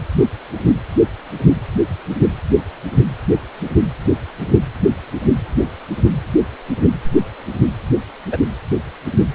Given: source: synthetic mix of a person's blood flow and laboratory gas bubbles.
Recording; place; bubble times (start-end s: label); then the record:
Doppler ultrasound of blood flow; precordium
8.32-8.38 s: bubbles
From the record:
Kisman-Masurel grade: 113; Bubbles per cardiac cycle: 1 to 2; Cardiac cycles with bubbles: 1 to 10%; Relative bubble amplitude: loud (0.450 to 0.775); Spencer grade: 1 (occasional bubble signal discernible with the cardiac motion signal, with majority of cardiac periods free of bubbles); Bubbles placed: anywhere in the cardiac cycle